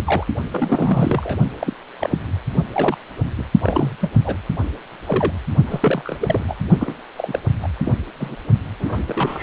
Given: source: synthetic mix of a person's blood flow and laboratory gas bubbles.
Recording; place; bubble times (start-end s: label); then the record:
Doppler ultrasound of blood flow; precordium
0.04-0.24 s: bubbles
0.51-1.39 s: bubbles
1.60-1.74 s: bubbles
1.99-2.18 s: bubbles
2.73-2.97 s: bubbles
3.38-3.44 s: bubbles
3.62-3.96 s: bubbles
4.01-4.09 s: bubbles
4.24-4.37 s: bubbles
5.07-5.32 s: bubbles
5.67-6.17 s: bubbles
6.20-6.44 s: bubbles
6.48-6.55 s: bubbles
6.80-6.96 s: bubbles
7.17-7.40 s: bubbles
7.63-7.68 s: bubbles
7.79-7.94 s: bubbles
8.18-8.35 s: bubbles
8.79-9.02 s: bubbles
9.06-9.43 s: bubbles
From the record:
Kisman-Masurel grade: 242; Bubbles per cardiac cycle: several, 3 to 8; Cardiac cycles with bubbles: 100%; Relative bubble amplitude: moderate (0.250 to 0.450); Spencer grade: 3 (all of the cardiac periods contain showers or single bubble signals, but not dominating or overriding the cardiac motion signals); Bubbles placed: only in the low amplitude regions of the cardiac cycle